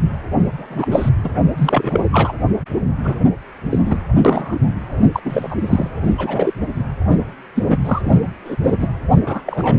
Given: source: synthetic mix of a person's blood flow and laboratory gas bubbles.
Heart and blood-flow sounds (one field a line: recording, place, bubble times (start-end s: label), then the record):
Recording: Doppler ultrasound of blood flow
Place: precordium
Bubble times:
0.57-0.88 s: bubbles
0.91-1.09 s: bubbles
1.24-1.30 s: bubbles
1.57-2.05 s: bubbles
2.12-2.32 s: bubbles
3.03-3.14 s: bubbles
3.69-3.79 s: bubbles
3.85-3.96 s: bubbles
4.25-4.58 s: bubbles
5.13-5.21 s: bubbles
5.25-5.56 s: bubbles
5.59-5.88 s: bubbles
6.01-6.54 s: bubbles
6.60-6.67 s: bubbles
7.55-7.67 s: bubbles
7.70-7.77 s: bubbles
7.85-8.02 s: bubbles
8.04-8.20 s: bubbles
8.45-8.56 s: bubbles
8.63-8.77 s: bubbles
8.79-8.88 s: bubbles
9.26-9.42 s: bubbles
9.46-9.78 s: bubbles
From the record:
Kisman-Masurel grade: 243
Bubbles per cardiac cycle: several, 3 to 8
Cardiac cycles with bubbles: 100%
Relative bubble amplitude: loud (0.450 to 0.775)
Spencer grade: 3 (all of the cardiac periods contain showers or single bubble signals, but not dominating or overriding the cardiac motion signals)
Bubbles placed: anywhere in the cardiac cycle